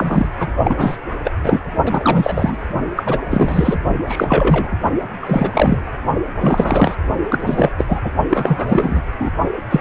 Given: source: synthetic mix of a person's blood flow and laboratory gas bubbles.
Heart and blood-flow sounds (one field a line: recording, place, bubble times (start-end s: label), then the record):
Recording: Doppler ultrasound of blood flow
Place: precordium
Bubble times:
0.00-0.29 s: bubbles
0.39-0.48 s: bubbles
0.64-0.97 s: bubbles
1.24-1.31 s: bubbles
1.44-1.59 s: bubbles
1.85-2.57 s: bubbles
2.96-3.19 s: bubbles
3.31-3.76 s: bubbles
4.07-4.72 s: bubbles
5.22-5.81 s: bubbles
6.41-6.95 s: bubbles
7.30-7.71 s: bubbles
7.78-7.85 s: bubbles
7.89-8.01 s: bubbles
8.04-8.11 s: bubbles
8.29-9.01 s: bubbles
9.20-9.29 s: bubbles
9.70-9.81 s: bubbles
From the record:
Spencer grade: 3 (all of the cardiac periods contain showers or single bubble signals, but not dominating or overriding the cardiac motion signals)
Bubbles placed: only in the low amplitude regions of the cardiac cycle